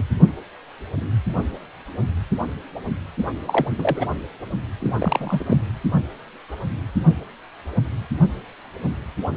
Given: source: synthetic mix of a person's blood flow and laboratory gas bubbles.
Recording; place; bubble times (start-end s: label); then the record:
Doppler ultrasound of blood flow; precordium
0.00-0.03 s: bubbles
3.46-3.71 s: bubbles
3.78-4.11 s: bubbles
4.79-4.97 s: bubbles
5.00-5.58 s: bubbles
From the record:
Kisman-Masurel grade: 222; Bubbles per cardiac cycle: several, 3 to 8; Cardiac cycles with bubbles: 10 to 50%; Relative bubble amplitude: moderate (0.250 to 0.450); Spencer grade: 2 (many but less than half of the cardiac periods contain bubble signals, singularly or in groups); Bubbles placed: anywhere in the cardiac cycle